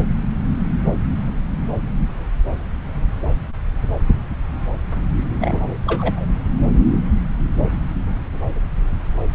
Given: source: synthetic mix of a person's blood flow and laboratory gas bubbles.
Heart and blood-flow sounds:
Doppler ultrasound of blood flow; subclavian vein
5.39-5.77 s: bubbles
5.86-6.25 s: bubbles
From the record:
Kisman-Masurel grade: 212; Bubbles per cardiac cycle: several, 3 to 8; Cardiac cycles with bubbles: 1 to 10%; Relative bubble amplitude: moderate (0.250 to 0.450); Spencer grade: 1 (occasional bubble signal discernible with the cardiac motion signal, with majority of cardiac periods free of bubbles); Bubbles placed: anywhere in the cardiac cycle

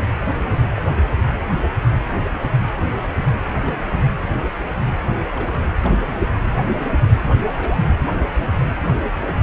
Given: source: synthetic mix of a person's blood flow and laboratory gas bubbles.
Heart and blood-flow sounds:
Doppler ultrasound of blood flow; precordium
0.77-0.81 s: bubbles
3.65-3.99 s: bubbles
5.35-5.60 s: bubbles
5.83-5.94 s: bubbles
6.07-6.16 s: bubbles
7.48-7.82 s: bubbles
9.27-9.34 s: bubbles
From the record:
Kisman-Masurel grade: 121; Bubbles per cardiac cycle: 1 to 2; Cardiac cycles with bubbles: 10 to 50%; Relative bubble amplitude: barely perceptible (0.100 to 0.250); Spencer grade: 2 (many but less than half of the cardiac periods contain bubble signals, singularly or in groups); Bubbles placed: anywhere in the cardiac cycle

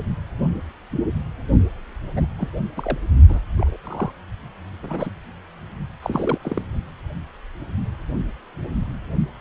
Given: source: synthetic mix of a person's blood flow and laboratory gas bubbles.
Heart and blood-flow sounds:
Doppler ultrasound of blood flow; precordium
2.14-2.26 s: bubbles
2.38-2.48 s: bubbles
2.76-2.98 s: bubbles
3.28-3.39 s: bubbles
3.56-3.76 s: bubbles
3.83-4.12 s: bubbles
4.83-5.10 s: bubbles
6.02-6.38 s: bubbles
6.42-6.62 s: bubbles
From the record:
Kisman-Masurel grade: 232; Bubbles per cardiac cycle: several, 3 to 8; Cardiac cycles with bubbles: 50 to 99%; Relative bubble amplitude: moderate (0.250 to 0.450); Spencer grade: 3 (all of the cardiac periods contain showers or single bubble signals, but not dominating or overriding the cardiac motion signals); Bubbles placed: only in the low amplitude regions of the cardiac cycle

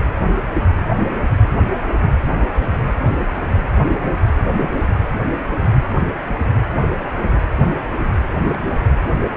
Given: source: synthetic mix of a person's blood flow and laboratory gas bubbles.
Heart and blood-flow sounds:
Doppler ultrasound of blood flow; precordium
2.98-3.04 s: bubbles
4.40-4.86 s: bubbles
6.27-6.36 s: bubbles
6.98-7.08 s: bubbles
8.51-8.57 s: bubbles
8.65-8.79 s: bubbles
From the record:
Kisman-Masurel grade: 121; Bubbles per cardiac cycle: 1 to 2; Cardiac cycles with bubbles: 10 to 50%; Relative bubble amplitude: barely perceptible (0.100 to 0.250); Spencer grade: 2 (many but less than half of the cardiac periods contain bubble signals, singularly or in groups); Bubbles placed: anywhere in the cardiac cycle

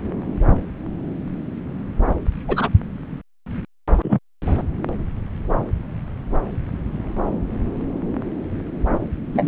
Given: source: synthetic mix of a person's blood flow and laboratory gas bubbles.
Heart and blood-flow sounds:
Doppler ultrasound of blood flow; subclavian vein
2.48-2.69 s: bubbles
4.03-4.19 s: bubbles
9.33-9.48 s: bubbles
From the record:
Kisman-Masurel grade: 123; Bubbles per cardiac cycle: 1 to 2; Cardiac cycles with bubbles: 10 to 50%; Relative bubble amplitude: loud (0.450 to 0.775); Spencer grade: 2 (many but less than half of the cardiac periods contain bubble signals, singularly or in groups); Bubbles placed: anywhere in the cardiac cycle

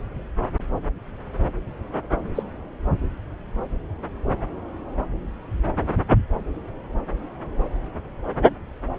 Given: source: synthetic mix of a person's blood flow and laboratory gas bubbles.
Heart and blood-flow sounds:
Doppler ultrasound of blood flow; subclavian vein
2.35-2.43 s: bubbles
From the record:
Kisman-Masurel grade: 112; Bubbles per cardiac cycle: 1 to 2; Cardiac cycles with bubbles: 1 to 10%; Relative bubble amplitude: moderate (0.250 to 0.450); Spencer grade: 1 (occasional bubble signal discernible with the cardiac motion signal, with majority of cardiac periods free of bubbles); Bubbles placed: anywhere in the cardiac cycle

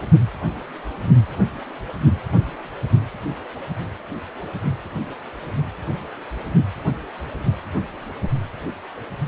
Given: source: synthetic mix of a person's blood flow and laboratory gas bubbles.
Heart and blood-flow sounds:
Doppler ultrasound of blood flow; precordium
no bubbles
From the record:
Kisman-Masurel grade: 000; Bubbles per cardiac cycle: 0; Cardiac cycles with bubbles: 0%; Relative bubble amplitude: no bubbles discernible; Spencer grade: 0 (complete lack of bubble signals)

